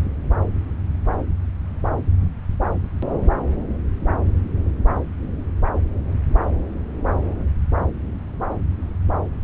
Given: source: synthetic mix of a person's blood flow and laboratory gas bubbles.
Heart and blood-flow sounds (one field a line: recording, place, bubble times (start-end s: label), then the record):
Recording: Doppler ultrasound of blood flow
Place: subclavian vein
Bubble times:
no bubbles
From the record:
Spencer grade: 0 (complete lack of bubble signals)